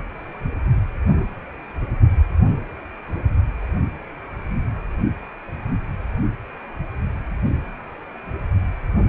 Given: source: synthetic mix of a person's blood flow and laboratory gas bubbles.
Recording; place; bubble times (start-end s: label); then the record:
Doppler ultrasound of blood flow; precordium
no bubbles
From the record:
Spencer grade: 0 (complete lack of bubble signals)